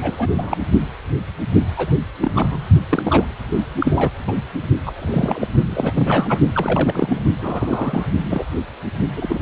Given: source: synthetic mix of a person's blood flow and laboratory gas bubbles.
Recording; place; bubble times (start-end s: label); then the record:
Doppler ultrasound of blood flow; precordium
0.00-0.57 s: bubbles
1.76-1.93 s: bubbles
2.20-2.31 s: bubbles
2.35-2.67 s: bubbles
2.89-3.34 s: bubbles
3.78-4.12 s: bubbles
4.27-4.33 s: bubbles
4.86-4.92 s: bubbles
4.96-5.48 s: bubbles
5.66-5.92 s: bubbles
5.94-6.40 s: bubbles
6.54-7.22 s: bubbles
7.41-8.07 s: bubbles
8.25-8.45 s: bubbles
9.16-9.40 s: bubbles
From the record:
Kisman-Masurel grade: 232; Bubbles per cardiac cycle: several, 3 to 8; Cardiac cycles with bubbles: 50 to 99%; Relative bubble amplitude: moderate (0.250 to 0.450); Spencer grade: 3 (all of the cardiac periods contain showers or single bubble signals, but not dominating or overriding the cardiac motion signals); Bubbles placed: only in the low amplitude regions of the cardiac cycle